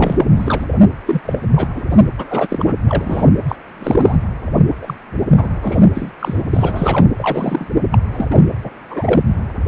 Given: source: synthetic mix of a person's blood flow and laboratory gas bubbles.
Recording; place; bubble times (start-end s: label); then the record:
Doppler ultrasound of blood flow; precordium
0.00-0.26 s: bubbles
0.36-0.66 s: bubbles
1.06-1.21 s: bubbles
1.25-1.39 s: bubbles
1.56-1.68 s: bubbles
1.76-1.82 s: bubbles
1.90-2.09 s: bubbles
2.17-2.78 s: bubbles
2.85-3.27 s: bubbles
3.48-3.55 s: bubbles
3.79-4.17 s: bubbles
4.82-4.95 s: bubbles
5.38-5.50 s: bubbles
5.61-5.83 s: bubbles
5.95-6.12 s: bubbles
6.19-6.43 s: bubbles
6.50-7.08 s: bubbles
7.19-7.67 s: bubbles
7.92-7.99 s: bubbles
8.12-8.27 s: bubbles
8.30-8.42 s: bubbles
8.63-8.71 s: bubbles
8.90-9.23 s: bubbles
From the record:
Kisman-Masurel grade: 243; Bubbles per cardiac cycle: several, 3 to 8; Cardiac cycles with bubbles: 100%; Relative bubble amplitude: loud (0.450 to 0.775); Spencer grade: 3 (all of the cardiac periods contain showers or single bubble signals, but not dominating or overriding the cardiac motion signals); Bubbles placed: anywhere in the cardiac cycle